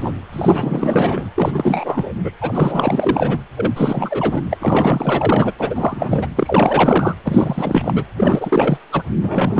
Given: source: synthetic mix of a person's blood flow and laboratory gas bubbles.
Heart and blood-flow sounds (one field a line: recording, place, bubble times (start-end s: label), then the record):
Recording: Doppler ultrasound of blood flow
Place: precordium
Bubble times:
0.00-0.12 s: bubbles
0.33-1.30 s: bubbles
1.35-2.14 s: bubbles
2.24-2.32 s: bubbles
2.41-3.38 s: bubbles
3.56-3.72 s: bubbles
3.76-4.42 s: bubbles
4.50-5.52 s: bubbles
5.59-6.28 s: bubbles
6.36-7.14 s: bubbles
7.23-8.04 s: bubbles
8.17-8.78 s: bubbles
8.92-9.03 s: bubbles
9.22-9.60 s: bubbles
From the record:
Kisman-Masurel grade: 444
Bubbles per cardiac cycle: continuous sound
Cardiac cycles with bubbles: 100%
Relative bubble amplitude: maximal (0.775 to 0.999)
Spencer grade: 4 (maximum detectable bubble signal sounding continuously throughout systole and diastole of every cardiac period, and overriding the amplitude of the normal cardiac signals)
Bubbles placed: anywhere in the cardiac cycle